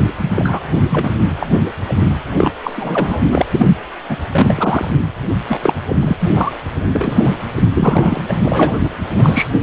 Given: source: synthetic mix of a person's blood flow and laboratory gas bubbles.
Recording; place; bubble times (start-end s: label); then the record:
Doppler ultrasound of blood flow; precordium
0.22-0.31 s: bubbles
0.36-0.60 s: bubbles
0.90-1.10 s: bubbles
1.39-1.47 s: bubbles
1.66-1.71 s: bubbles
1.88-1.95 s: bubbles
2.36-2.52 s: bubbles
2.63-2.73 s: bubbles
2.75-3.20 s: bubbles
3.31-3.44 s: bubbles
3.50-3.68 s: bubbles
4.09-4.17 s: bubbles
4.32-4.89 s: bubbles
5.48-5.59 s: bubbles
5.62-5.74 s: bubbles
5.87-5.96 s: bubbles
6.01-6.17 s: bubbles
6.20-6.52 s: bubbles
6.93-7.35 s: bubbles
7.55-7.69 s: bubbles
7.74-8.21 s: bubbles
8.28-8.77 s: bubbles
8.83-8.90 s: bubbles
9.12-9.49 s: bubbles
9.54-9.60 s: bubbles
From the record:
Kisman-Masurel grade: 243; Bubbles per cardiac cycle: several, 3 to 8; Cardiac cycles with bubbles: 100%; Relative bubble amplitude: loud (0.450 to 0.775); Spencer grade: 3 (all of the cardiac periods contain showers or single bubble signals, but not dominating or overriding the cardiac motion signals); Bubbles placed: anywhere in the cardiac cycle